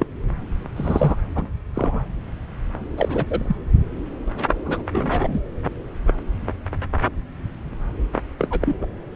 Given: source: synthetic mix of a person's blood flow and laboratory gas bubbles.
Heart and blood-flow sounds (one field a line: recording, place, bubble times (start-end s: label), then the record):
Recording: Doppler ultrasound of blood flow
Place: subclavian vein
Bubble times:
0.00-0.06 s: bubbles
0.76-1.16 s: bubbles
1.35-1.46 s: bubbles
1.74-2.04 s: bubbles
2.97-3.25 s: bubbles
3.27-3.57 s: bubbles
4.66-4.83 s: bubbles
4.92-5.41 s: bubbles
8.38-8.76 s: bubbles
8.81-8.85 s: bubbles
From the record:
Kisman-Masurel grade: 232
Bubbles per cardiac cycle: several, 3 to 8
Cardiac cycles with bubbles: 50 to 99%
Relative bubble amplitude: moderate (0.250 to 0.450)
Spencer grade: 3 (all of the cardiac periods contain showers or single bubble signals, but not dominating or overriding the cardiac motion signals)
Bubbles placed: anywhere in the cardiac cycle